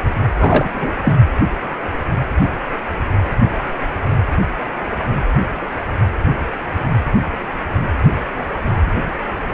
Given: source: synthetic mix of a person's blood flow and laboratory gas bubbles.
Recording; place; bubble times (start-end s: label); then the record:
Doppler ultrasound of blood flow; precordium
0.39-0.70 s: bubbles
0.72-0.93 s: bubbles
1.04-1.18 s: bubbles
From the record:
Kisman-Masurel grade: 213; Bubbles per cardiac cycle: several, 3 to 8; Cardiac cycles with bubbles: 1 to 10%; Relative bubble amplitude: loud (0.450 to 0.775); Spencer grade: 1 (occasional bubble signal discernible with the cardiac motion signal, with majority of cardiac periods free of bubbles); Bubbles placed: anywhere in the cardiac cycle